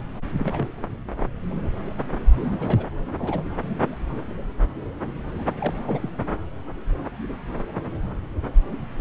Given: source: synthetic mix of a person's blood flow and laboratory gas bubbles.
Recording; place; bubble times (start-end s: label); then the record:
Doppler ultrasound of blood flow; subclavian vein
0.38-0.68 s: bubbles
2.40-2.85 s: bubbles
3.19-3.43 s: bubbles
5.60-5.80 s: bubbles
5.85-6.10 s: bubbles
From the record:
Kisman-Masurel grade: 221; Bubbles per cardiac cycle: several, 3 to 8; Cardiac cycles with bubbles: 10 to 50%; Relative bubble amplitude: barely perceptible (0.100 to 0.250); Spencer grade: 2 (many but less than half of the cardiac periods contain bubble signals, singularly or in groups); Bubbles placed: anywhere in the cardiac cycle